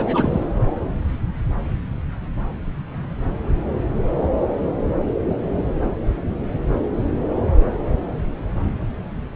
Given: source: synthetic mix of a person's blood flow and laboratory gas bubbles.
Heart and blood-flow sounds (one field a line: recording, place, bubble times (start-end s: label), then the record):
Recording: Doppler ultrasound of blood flow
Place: subclavian vein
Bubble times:
0.00-0.45 s: bubbles
From the record:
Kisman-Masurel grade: 112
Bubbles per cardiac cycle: 1 to 2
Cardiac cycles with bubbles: 1 to 10%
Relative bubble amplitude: moderate (0.250 to 0.450)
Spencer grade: 1 (occasional bubble signal discernible with the cardiac motion signal, with majority of cardiac periods free of bubbles)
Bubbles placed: anywhere in the cardiac cycle